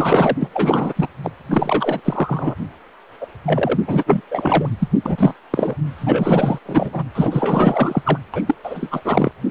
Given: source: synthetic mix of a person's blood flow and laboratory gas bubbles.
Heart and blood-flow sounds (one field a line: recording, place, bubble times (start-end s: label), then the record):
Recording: Doppler ultrasound of blood flow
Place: precordium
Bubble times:
0.00-0.36 s: bubbles
0.41-0.48 s: bubbles
0.53-0.93 s: bubbles
0.95-1.08 s: bubbles
1.24-1.31 s: bubbles
1.50-2.00 s: bubbles
2.04-2.55 s: bubbles
3.21-3.27 s: bubbles
3.46-3.79 s: bubbles
3.87-4.21 s: bubbles
4.30-4.69 s: bubbles
4.79-4.88 s: bubbles
5.05-5.36 s: bubbles
5.50-5.75 s: bubbles
6.01-6.58 s: bubbles
6.65-7.04 s: bubbles
7.15-8.02 s: bubbles
8.05-8.19 s: bubbles
8.34-8.42 s: bubbles
8.46-8.55 s: bubbles
8.63-9.02 s: bubbles
9.04-9.31 s: bubbles
From the record:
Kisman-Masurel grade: 444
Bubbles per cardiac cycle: continuous sound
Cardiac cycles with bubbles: 100%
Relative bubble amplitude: maximal (0.775 to 0.999)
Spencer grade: 4 (maximum detectable bubble signal sounding continuously throughout systole and diastole of every cardiac period, and overriding the amplitude of the normal cardiac signals)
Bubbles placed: anywhere in the cardiac cycle